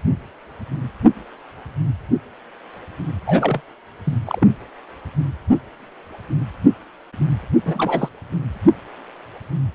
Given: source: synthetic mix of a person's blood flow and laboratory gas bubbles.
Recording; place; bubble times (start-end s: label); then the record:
Doppler ultrasound of blood flow; precordium
3.26-3.61 s: bubbles
4.04-4.18 s: bubbles
4.25-4.47 s: bubbles
7.65-8.09 s: bubbles
From the record:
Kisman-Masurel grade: 222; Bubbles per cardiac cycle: several, 3 to 8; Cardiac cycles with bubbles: 10 to 50%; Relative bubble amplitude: moderate (0.250 to 0.450); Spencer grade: 2 (many but less than half of the cardiac periods contain bubble signals, singularly or in groups); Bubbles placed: anywhere in the cardiac cycle